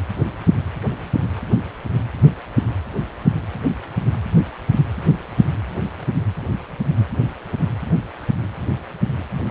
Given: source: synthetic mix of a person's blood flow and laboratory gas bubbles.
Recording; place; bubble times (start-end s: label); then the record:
Doppler ultrasound of blood flow; precordium
no bubbles
From the record:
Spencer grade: 0 (complete lack of bubble signals)